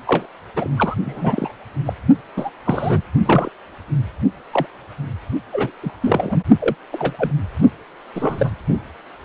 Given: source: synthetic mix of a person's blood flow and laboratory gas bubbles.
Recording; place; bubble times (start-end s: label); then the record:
Doppler ultrasound of blood flow; precordium
0.07-0.27 s: bubbles
0.56-0.68 s: bubbles
0.77-0.95 s: bubbles
1.05-1.54 s: bubbles
1.85-1.93 s: bubbles
2.37-2.50 s: bubbles
2.65-3.02 s: bubbles
3.25-3.50 s: bubbles
4.51-4.67 s: bubbles
5.52-5.71 s: bubbles
5.83-5.92 s: bubbles
6.01-6.38 s: bubbles
6.60-6.75 s: bubbles
6.92-7.13 s: bubbles
7.18-7.32 s: bubbles
8.14-8.52 s: bubbles
From the record:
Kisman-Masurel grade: 232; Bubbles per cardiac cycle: several, 3 to 8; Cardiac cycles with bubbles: 50 to 99%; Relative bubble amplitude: moderate (0.250 to 0.450); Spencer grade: 3 (all of the cardiac periods contain showers or single bubble signals, but not dominating or overriding the cardiac motion signals); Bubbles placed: only in the low amplitude regions of the cardiac cycle